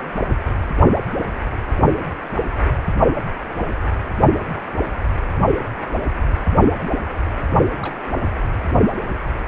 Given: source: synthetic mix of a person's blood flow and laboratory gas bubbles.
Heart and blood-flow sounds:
Doppler ultrasound of blood flow; precordium
7.82-7.96 s: bubbles
From the record:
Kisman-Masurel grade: 111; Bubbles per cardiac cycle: 1 to 2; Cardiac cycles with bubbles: 1 to 10%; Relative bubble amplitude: barely perceptible (0.100 to 0.250); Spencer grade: 1 (occasional bubble signal discernible with the cardiac motion signal, with majority of cardiac periods free of bubbles); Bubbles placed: only in the low amplitude regions of the cardiac cycle

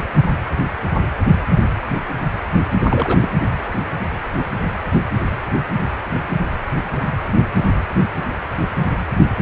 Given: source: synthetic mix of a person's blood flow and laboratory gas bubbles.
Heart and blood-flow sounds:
Doppler ultrasound of blood flow; precordium
2.83-3.29 s: bubbles
From the record:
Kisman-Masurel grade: 212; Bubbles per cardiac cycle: several, 3 to 8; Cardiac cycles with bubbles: 1 to 10%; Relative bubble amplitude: moderate (0.250 to 0.450); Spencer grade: 1 (occasional bubble signal discernible with the cardiac motion signal, with majority of cardiac periods free of bubbles); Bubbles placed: anywhere in the cardiac cycle

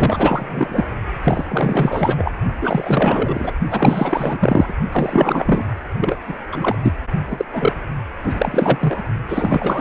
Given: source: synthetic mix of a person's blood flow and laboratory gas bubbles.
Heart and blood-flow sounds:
Doppler ultrasound of blood flow; precordium
0.00-0.85 s: bubbles
1.24-1.45 s: bubbles
1.48-2.31 s: bubbles
2.61-3.56 s: bubbles
3.71-4.75 s: bubbles
4.92-5.65 s: bubbles
6.00-6.18 s: bubbles
6.27-6.36 s: bubbles
6.52-6.75 s: bubbles
6.83-6.94 s: bubbles
7.26-7.45 s: bubbles
7.51-7.81 s: bubbles
8.23-9.03 s: bubbles
9.28-9.81 s: bubbles
From the record:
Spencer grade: 4 (maximum detectable bubble signal sounding continuously throughout systole and diastole of every cardiac period, and overriding the amplitude of the normal cardiac signals); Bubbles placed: only in the low amplitude regions of the cardiac cycle

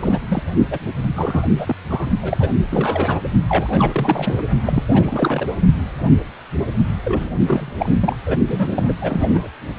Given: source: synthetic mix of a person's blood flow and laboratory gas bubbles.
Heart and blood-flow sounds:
Doppler ultrasound of blood flow; precordium
0.00-0.18 s: bubbles
0.29-0.42 s: bubbles
0.70-0.78 s: bubbles
1.16-1.49 s: bubbles
1.56-1.75 s: bubbles
1.90-2.07 s: bubbles
2.22-2.38 s: bubbles
2.40-2.49 s: bubbles
2.70-3.20 s: bubbles
3.48-4.43 s: bubbles
4.67-4.83 s: bubbles
4.93-5.51 s: bubbles
7.04-7.28 s: bubbles
7.47-7.73 s: bubbles
7.79-7.90 s: bubbles
8.01-8.16 s: bubbles
8.25-8.38 s: bubbles
8.47-8.92 s: bubbles
9.01-9.47 s: bubbles
From the record:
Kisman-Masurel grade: 332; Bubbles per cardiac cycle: rolling drumbeat, 9 or more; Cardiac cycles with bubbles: 50 to 99%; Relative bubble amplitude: moderate (0.250 to 0.450); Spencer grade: 3 (all of the cardiac periods contain showers or single bubble signals, but not dominating or overriding the cardiac motion signals); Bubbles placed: only in the low amplitude regions of the cardiac cycle

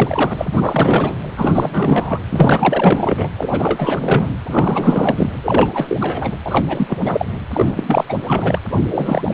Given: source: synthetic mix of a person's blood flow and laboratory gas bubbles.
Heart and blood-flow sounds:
Doppler ultrasound of blood flow; precordium
0.00-0.34 s: bubbles
0.38-1.16 s: bubbles
1.37-2.19 s: bubbles
2.31-3.29 s: bubbles
3.37-4.29 s: bubbles
4.46-5.30 s: bubbles
5.43-5.97 s: bubbles
6.01-6.31 s: bubbles
6.44-7.26 s: bubbles
7.53-8.04 s: bubbles
8.09-8.14 s: bubbles
8.27-8.59 s: bubbles
8.71-8.78 s: bubbles
8.89-9.34 s: bubbles
From the record:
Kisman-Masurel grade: 444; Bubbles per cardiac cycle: continuous sound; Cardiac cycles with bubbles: 100%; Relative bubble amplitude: maximal (0.775 to 0.999); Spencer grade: 4 (maximum detectable bubble signal sounding continuously throughout systole and diastole of every cardiac period, and overriding the amplitude of the normal cardiac signals); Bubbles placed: anywhere in the cardiac cycle

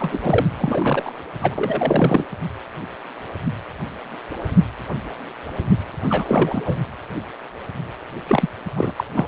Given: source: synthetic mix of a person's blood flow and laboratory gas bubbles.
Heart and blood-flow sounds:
Doppler ultrasound of blood flow; precordium
0.00-0.19 s: bubbles
0.22-0.46 s: bubbles
0.57-1.11 s: bubbles
1.41-2.24 s: bubbles
6.09-6.62 s: bubbles
6.65-6.78 s: bubbles
8.28-8.49 s: bubbles
8.76-8.93 s: bubbles
8.96-9.04 s: bubbles
9.15-9.28 s: bubbles
From the record:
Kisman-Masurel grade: 332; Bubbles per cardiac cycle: rolling drumbeat, 9 or more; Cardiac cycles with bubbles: 50 to 99%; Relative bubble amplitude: moderate (0.250 to 0.450); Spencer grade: 3 (all of the cardiac periods contain showers or single bubble signals, but not dominating or overriding the cardiac motion signals); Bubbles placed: anywhere in the cardiac cycle

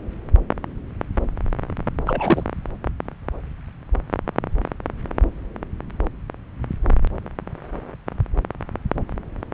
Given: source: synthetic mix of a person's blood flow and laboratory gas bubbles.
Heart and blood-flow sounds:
Doppler ultrasound of blood flow; subclavian vein
2.06-2.44 s: bubbles
From the record:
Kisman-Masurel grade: 212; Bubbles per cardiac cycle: several, 3 to 8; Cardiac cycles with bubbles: 1 to 10%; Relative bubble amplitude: moderate (0.250 to 0.450); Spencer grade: 1 (occasional bubble signal discernible with the cardiac motion signal, with majority of cardiac periods free of bubbles); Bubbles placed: anywhere in the cardiac cycle

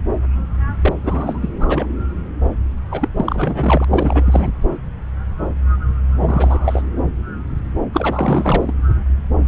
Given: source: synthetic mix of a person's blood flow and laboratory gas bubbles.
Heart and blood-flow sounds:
Doppler ultrasound of blood flow; subclavian vein
0.80-0.94 s: bubbles
1.03-1.39 s: bubbles
1.42-1.50 s: bubbles
1.60-1.87 s: bubbles
2.91-3.08 s: bubbles
3.16-3.85 s: bubbles
3.90-4.49 s: bubbles
6.19-6.82 s: bubbles
7.92-8.73 s: bubbles
From the record:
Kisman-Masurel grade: 332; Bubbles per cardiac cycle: rolling drumbeat, 9 or more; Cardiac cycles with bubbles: 50 to 99%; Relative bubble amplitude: moderate (0.250 to 0.450); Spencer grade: 3 (all of the cardiac periods contain showers or single bubble signals, but not dominating or overriding the cardiac motion signals); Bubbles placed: anywhere in the cardiac cycle

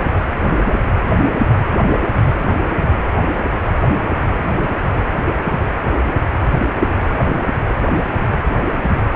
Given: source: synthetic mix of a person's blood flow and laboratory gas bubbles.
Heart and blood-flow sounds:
Doppler ultrasound of blood flow; precordium
0.64-0.75 s: bubbles
From the record:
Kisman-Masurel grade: 111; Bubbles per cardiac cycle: 1 to 2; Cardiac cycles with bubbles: 1 to 10%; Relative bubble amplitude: barely perceptible (0.100 to 0.250); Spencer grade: 1 (occasional bubble signal discernible with the cardiac motion signal, with majority of cardiac periods free of bubbles); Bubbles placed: anywhere in the cardiac cycle

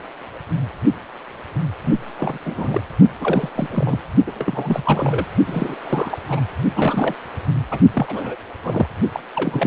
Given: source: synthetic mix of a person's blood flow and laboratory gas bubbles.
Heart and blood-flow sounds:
Doppler ultrasound of blood flow; precordium
1.83-1.92 s: bubbles
2.17-2.38 s: bubbles
2.45-2.81 s: bubbles
3.21-3.49 s: bubbles
3.55-4.01 s: bubbles
4.27-4.32 s: bubbles
4.34-5.27 s: bubbles
5.46-5.75 s: bubbles
5.85-6.18 s: bubbles
6.29-6.41 s: bubbles
6.74-7.15 s: bubbles
7.71-7.80 s: bubbles
7.93-8.35 s: bubbles
8.62-8.88 s: bubbles
9.12-9.20 s: bubbles
9.35-9.67 s: bubbles
From the record:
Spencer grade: 3 (all of the cardiac periods contain showers or single bubble signals, but not dominating or overriding the cardiac motion signals); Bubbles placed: only in the low amplitude regions of the cardiac cycle

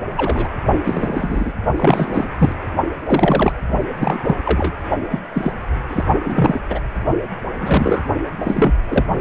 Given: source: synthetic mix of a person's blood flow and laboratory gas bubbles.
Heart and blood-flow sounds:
Doppler ultrasound of blood flow; precordium
0.16-0.49 s: bubbles
0.84-1.53 s: bubbles
1.76-2.25 s: bubbles
2.38-2.52 s: bubbles
3.06-3.52 s: bubbles
3.98-4.38 s: bubbles
4.45-4.74 s: bubbles
5.10-5.20 s: bubbles
5.33-5.52 s: bubbles
5.89-6.04 s: bubbles
6.22-6.61 s: bubbles
6.69-6.80 s: bubbles
7.60-8.05 s: bubbles
8.40-8.73 s: bubbles
8.88-9.05 s: bubbles
From the record:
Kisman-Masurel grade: 243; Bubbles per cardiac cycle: several, 3 to 8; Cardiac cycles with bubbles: 100%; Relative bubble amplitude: loud (0.450 to 0.775); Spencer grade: 3 (all of the cardiac periods contain showers or single bubble signals, but not dominating or overriding the cardiac motion signals); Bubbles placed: only in the low amplitude regions of the cardiac cycle

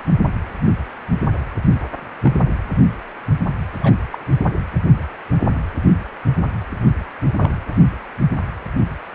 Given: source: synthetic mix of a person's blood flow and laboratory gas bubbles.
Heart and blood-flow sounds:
Doppler ultrasound of blood flow; precordium
2.22-2.39 s: bubbles
3.81-3.94 s: bubbles
4.12-4.18 s: bubbles
7.38-7.50 s: bubbles
From the record:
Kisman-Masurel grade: 122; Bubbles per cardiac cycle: 1 to 2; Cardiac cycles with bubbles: 10 to 50%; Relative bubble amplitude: moderate (0.250 to 0.450); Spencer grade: 2 (many but less than half of the cardiac periods contain bubble signals, singularly or in groups); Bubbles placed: anywhere in the cardiac cycle

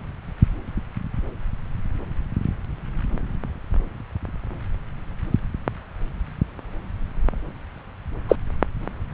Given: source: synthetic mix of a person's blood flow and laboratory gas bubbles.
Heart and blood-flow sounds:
Doppler ultrasound of blood flow; subclavian vein
8.28-8.36 s: bubbles
From the record:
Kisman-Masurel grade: 113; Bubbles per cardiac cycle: 1 to 2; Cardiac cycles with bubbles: 1 to 10%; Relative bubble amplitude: loud (0.450 to 0.775); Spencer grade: 1 (occasional bubble signal discernible with the cardiac motion signal, with majority of cardiac periods free of bubbles); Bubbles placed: anywhere in the cardiac cycle

